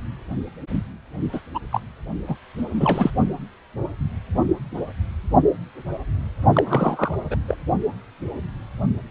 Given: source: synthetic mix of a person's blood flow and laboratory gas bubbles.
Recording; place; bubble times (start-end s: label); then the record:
Doppler ultrasound of blood flow; precordium
1.32-1.41 s: bubbles
1.54-1.59 s: bubbles
1.72-1.80 s: bubbles
2.27-2.36 s: bubbles
2.57-3.10 s: bubbles
6.53-7.14 s: bubbles
7.30-7.36 s: bubbles
7.47-7.57 s: bubbles
From the record:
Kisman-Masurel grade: 222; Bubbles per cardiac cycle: several, 3 to 8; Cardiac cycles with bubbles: 10 to 50%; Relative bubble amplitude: moderate (0.250 to 0.450); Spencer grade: 2 (many but less than half of the cardiac periods contain bubble signals, singularly or in groups); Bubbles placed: only in the low amplitude regions of the cardiac cycle